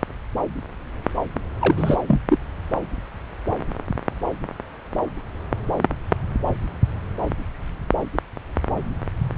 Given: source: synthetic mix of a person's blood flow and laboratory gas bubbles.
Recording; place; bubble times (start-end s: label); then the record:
Doppler ultrasound of blood flow; subclavian vein
1.61-1.97 s: bubbles
2.07-2.19 s: bubbles
2.29-2.38 s: bubbles
From the record:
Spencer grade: 1 (occasional bubble signal discernible with the cardiac motion signal, with majority of cardiac periods free of bubbles); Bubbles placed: anywhere in the cardiac cycle